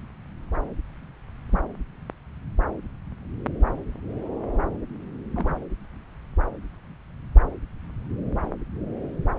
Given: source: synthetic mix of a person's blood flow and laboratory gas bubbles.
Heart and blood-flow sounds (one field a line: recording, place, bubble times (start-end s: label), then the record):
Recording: Doppler ultrasound of blood flow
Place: subclavian vein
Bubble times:
1.51-1.60 s: bubbles
5.35-5.56 s: bubbles
From the record:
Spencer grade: 2 (many but less than half of the cardiac periods contain bubble signals, singularly or in groups)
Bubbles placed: anywhere in the cardiac cycle